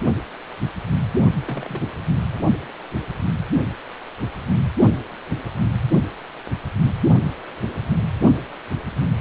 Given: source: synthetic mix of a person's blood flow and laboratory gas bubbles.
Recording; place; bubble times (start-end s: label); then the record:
Doppler ultrasound of blood flow; precordium
1.40-1.90 s: bubbles
2.34-2.40 s: bubbles
From the record:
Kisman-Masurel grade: 121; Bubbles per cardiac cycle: 1 to 2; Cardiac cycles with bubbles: 10 to 50%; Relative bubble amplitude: barely perceptible (0.100 to 0.250); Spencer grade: 2 (many but less than half of the cardiac periods contain bubble signals, singularly or in groups); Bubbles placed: only in the low amplitude regions of the cardiac cycle